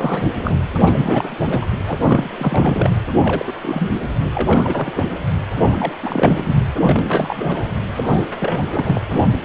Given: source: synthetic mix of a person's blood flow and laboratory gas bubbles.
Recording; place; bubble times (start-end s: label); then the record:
Doppler ultrasound of blood flow; precordium
0.00-0.22 s: bubbles
0.41-0.64 s: bubbles
0.86-0.92 s: bubbles
0.95-1.30 s: bubbles
1.45-1.71 s: bubbles
1.87-1.98 s: bubbles
2.00-2.30 s: bubbles
2.38-2.90 s: bubbles
3.21-3.52 s: bubbles
3.62-3.92 s: bubbles
4.03-4.09 s: bubbles
4.32-5.04 s: bubbles
5.53-5.92 s: bubbles
6.02-6.54 s: bubbles
6.83-7.67 s: bubbles
7.91-8.25 s: bubbles
8.40-9.02 s: bubbles
9.13-9.29 s: bubbles
9.31-9.38 s: bubbles
From the record:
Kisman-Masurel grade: 342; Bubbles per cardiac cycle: rolling drumbeat, 9 or more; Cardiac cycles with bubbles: 100%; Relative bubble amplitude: moderate (0.250 to 0.450); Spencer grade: 3 (all of the cardiac periods contain showers or single bubble signals, but not dominating or overriding the cardiac motion signals); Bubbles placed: anywhere in the cardiac cycle